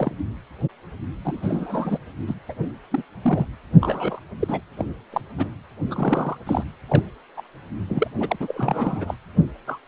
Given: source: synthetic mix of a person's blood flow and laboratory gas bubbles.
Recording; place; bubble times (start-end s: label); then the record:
Doppler ultrasound of blood flow; precordium
0.00-0.15 s: bubbles
1.24-1.98 s: bubbles
2.27-2.35 s: bubbles
2.48-2.54 s: bubbles
2.70-2.72 s: bubbles
2.91-3.03 s: bubbles
3.22-3.47 s: bubbles
3.81-4.19 s: bubbles
4.40-4.61 s: bubbles
4.77-4.85 s: bubbles
5.12-5.21 s: bubbles
5.38-5.51 s: bubbles
5.88-6.37 s: bubbles
6.46-6.64 s: bubbles
6.88-7.02 s: bubbles
7.36-7.42 s: bubbles
7.88-8.08 s: bubbles
8.20-8.36 s: bubbles
8.40-9.14 s: bubbles
9.67-9.79 s: bubbles
From the record:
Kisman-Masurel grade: 242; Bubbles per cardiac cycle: several, 3 to 8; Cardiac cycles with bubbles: 100%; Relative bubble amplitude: moderate (0.250 to 0.450); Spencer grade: 3 (all of the cardiac periods contain showers or single bubble signals, but not dominating or overriding the cardiac motion signals); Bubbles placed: anywhere in the cardiac cycle